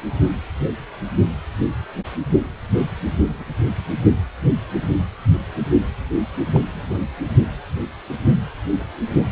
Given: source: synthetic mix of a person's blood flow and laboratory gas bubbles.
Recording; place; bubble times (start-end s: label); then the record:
Doppler ultrasound of blood flow; precordium
3.40-3.54 s: bubbles
6.53-6.60 s: bubbles
6.74-6.98 s: bubbles
From the record:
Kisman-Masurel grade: 111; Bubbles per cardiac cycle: 1 to 2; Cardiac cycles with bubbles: 1 to 10%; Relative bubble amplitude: barely perceptible (0.100 to 0.250); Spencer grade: 1 (occasional bubble signal discernible with the cardiac motion signal, with majority of cardiac periods free of bubbles); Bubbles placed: only in the low amplitude regions of the cardiac cycle